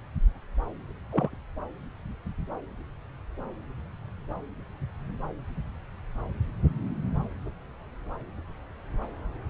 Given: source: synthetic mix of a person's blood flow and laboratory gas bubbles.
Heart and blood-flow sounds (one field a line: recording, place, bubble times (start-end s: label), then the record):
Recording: Doppler ultrasound of blood flow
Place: subclavian vein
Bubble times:
1.10-1.36 s: bubbles
From the record:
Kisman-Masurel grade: 113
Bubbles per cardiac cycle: 1 to 2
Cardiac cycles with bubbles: 1 to 10%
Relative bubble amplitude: loud (0.450 to 0.775)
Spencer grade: 1 (occasional bubble signal discernible with the cardiac motion signal, with majority of cardiac periods free of bubbles)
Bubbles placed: anywhere in the cardiac cycle